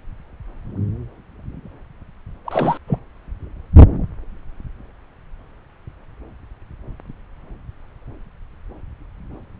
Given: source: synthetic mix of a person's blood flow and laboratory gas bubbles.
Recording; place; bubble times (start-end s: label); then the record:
Doppler ultrasound of blood flow; subclavian vein
2.44-2.77 s: bubbles
2.87-2.98 s: bubbles
From the record:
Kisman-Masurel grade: 212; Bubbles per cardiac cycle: several, 3 to 8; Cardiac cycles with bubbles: 1 to 10%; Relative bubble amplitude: moderate (0.250 to 0.450); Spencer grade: 1 (occasional bubble signal discernible with the cardiac motion signal, with majority of cardiac periods free of bubbles); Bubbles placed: anywhere in the cardiac cycle